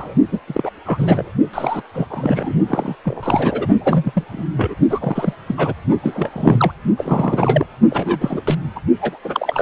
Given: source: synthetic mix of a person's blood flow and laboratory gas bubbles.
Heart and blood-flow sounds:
Doppler ultrasound of blood flow; precordium
0.00-0.15 s: bubbles
0.31-0.39 s: bubbles
0.47-0.70 s: bubbles
0.85-1.31 s: bubbles
1.53-1.82 s: bubbles
1.94-2.06 s: bubbles
2.10-2.52 s: bubbles
2.67-2.96 s: bubbles
3.04-3.67 s: bubbles
3.79-4.24 s: bubbles
4.32-4.44 s: bubbles
4.57-4.75 s: bubbles
4.90-5.33 s: bubbles
5.47-5.74 s: bubbles
6.03-6.72 s: bubbles
6.98-7.66 s: bubbles
7.90-8.42 s: bubbles
8.45-8.55 s: bubbles
8.76-8.79 s: bubbles
9.01-9.19 s: bubbles
9.24-9.62 s: bubbles
From the record:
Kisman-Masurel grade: 342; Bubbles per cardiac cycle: rolling drumbeat, 9 or more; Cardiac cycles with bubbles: 100%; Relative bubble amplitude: moderate (0.250 to 0.450); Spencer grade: 3 (all of the cardiac periods contain showers or single bubble signals, but not dominating or overriding the cardiac motion signals); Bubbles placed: only in the low amplitude regions of the cardiac cycle

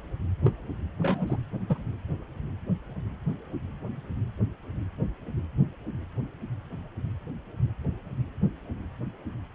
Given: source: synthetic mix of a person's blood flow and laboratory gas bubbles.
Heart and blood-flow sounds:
Doppler ultrasound of blood flow; precordium
0.45-0.55 s: bubbles
1.01-1.42 s: bubbles
1.69-1.77 s: bubbles
From the record:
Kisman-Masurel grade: 211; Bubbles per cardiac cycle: several, 3 to 8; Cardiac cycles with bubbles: 1 to 10%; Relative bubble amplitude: barely perceptible (0.100 to 0.250); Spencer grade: 1 (occasional bubble signal discernible with the cardiac motion signal, with majority of cardiac periods free of bubbles); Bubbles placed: anywhere in the cardiac cycle

